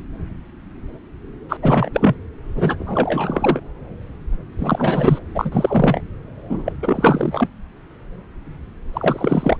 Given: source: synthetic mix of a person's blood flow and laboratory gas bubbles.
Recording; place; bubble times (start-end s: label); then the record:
Doppler ultrasound of blood flow; subclavian vein
1.49-1.57 s: bubbles
1.62-1.90 s: bubbles
1.94-2.15 s: bubbles
2.55-3.61 s: bubbles
4.59-5.19 s: bubbles
5.35-6.01 s: bubbles
6.49-6.72 s: bubbles
6.82-7.49 s: bubbles
8.93-9.57 s: bubbles
From the record:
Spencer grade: 3 (all of the cardiac periods contain showers or single bubble signals, but not dominating or overriding the cardiac motion signals); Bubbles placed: anywhere in the cardiac cycle